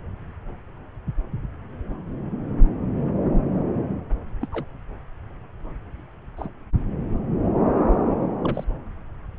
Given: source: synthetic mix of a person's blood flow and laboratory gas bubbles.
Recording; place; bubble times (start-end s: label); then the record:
Doppler ultrasound of blood flow; subclavian vein
4.41-4.48 s: bubbles
4.51-4.65 s: bubbles
6.37-6.49 s: bubbles
8.44-8.65 s: bubbles
From the record:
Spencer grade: 2 (many but less than half of the cardiac periods contain bubble signals, singularly or in groups); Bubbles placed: anywhere in the cardiac cycle